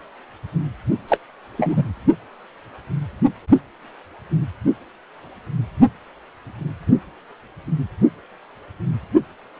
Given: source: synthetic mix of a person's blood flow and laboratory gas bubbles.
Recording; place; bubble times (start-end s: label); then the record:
Doppler ultrasound of blood flow; precordium
1.08-1.18 s: bubbles
1.57-1.84 s: bubbles
From the record:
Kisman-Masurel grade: 213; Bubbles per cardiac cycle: several, 3 to 8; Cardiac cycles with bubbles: 1 to 10%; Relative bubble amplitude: loud (0.450 to 0.775); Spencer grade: 1 (occasional bubble signal discernible with the cardiac motion signal, with majority of cardiac periods free of bubbles); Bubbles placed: only in the low amplitude regions of the cardiac cycle